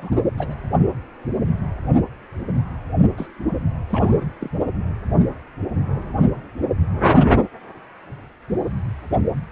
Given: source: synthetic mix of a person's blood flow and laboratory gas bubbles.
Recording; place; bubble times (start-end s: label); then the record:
Doppler ultrasound of blood flow; precordium
0.00-0.18 s: bubbles
0.37-0.54 s: bubbles
3.17-3.27 s: bubbles
3.88-4.24 s: bubbles
4.40-4.49 s: bubbles
From the record:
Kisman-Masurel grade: 221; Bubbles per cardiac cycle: several, 3 to 8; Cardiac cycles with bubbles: 10 to 50%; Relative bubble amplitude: barely perceptible (0.100 to 0.250); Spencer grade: 2 (many but less than half of the cardiac periods contain bubble signals, singularly or in groups); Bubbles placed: only in the low amplitude regions of the cardiac cycle